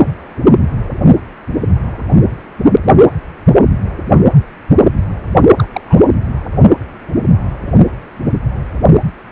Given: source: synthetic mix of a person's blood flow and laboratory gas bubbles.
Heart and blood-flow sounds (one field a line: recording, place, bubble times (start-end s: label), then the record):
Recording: Doppler ultrasound of blood flow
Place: precordium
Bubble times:
5.57-5.68 s: bubbles
5.73-5.81 s: bubbles
5.86-6.02 s: bubbles
From the record:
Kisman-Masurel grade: 212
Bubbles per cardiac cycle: several, 3 to 8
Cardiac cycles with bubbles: 1 to 10%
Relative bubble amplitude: moderate (0.250 to 0.450)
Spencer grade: 1 (occasional bubble signal discernible with the cardiac motion signal, with majority of cardiac periods free of bubbles)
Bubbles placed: anywhere in the cardiac cycle